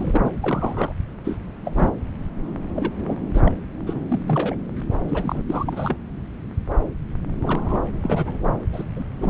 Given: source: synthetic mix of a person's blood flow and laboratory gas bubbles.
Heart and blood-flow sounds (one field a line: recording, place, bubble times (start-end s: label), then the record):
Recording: Doppler ultrasound of blood flow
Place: subclavian vein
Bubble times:
0.00-0.32 s: bubbles
0.42-0.93 s: bubbles
1.24-1.38 s: bubbles
1.65-1.72 s: bubbles
1.74-1.89 s: bubbles
2.75-3.21 s: bubbles
3.33-3.52 s: bubbles
3.86-4.05 s: bubbles
4.08-4.22 s: bubbles
4.26-4.55 s: bubbles
5.08-5.42 s: bubbles
5.47-5.96 s: bubbles
7.42-7.90 s: bubbles
7.95-8.54 s: bubbles
8.72-8.84 s: bubbles
8.96-9.04 s: bubbles
9.15-9.30 s: bubbles
From the record:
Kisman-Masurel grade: 232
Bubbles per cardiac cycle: several, 3 to 8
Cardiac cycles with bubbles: 50 to 99%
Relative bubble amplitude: moderate (0.250 to 0.450)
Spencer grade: 3 (all of the cardiac periods contain showers or single bubble signals, but not dominating or overriding the cardiac motion signals)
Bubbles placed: anywhere in the cardiac cycle